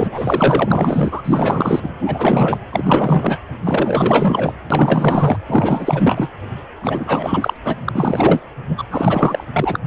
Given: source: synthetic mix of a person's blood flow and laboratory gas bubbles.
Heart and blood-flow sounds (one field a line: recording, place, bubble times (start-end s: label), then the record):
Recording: Doppler ultrasound of blood flow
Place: precordium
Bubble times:
0.00-1.22 s: bubbles
1.24-1.91 s: bubbles
1.99-2.58 s: bubbles
2.73-3.38 s: bubbles
3.63-4.53 s: bubbles
4.70-5.37 s: bubbles
5.47-6.29 s: bubbles
6.82-7.58 s: bubbles
7.65-7.77 s: bubbles
7.85-8.40 s: bubbles
8.68-8.84 s: bubbles
8.90-9.44 s: bubbles
9.53-9.79 s: bubbles
From the record:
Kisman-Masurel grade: 444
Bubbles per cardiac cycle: continuous sound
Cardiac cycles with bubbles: 100%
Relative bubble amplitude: maximal (0.775 to 0.999)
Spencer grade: 4 (maximum detectable bubble signal sounding continuously throughout systole and diastole of every cardiac period, and overriding the amplitude of the normal cardiac signals)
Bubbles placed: anywhere in the cardiac cycle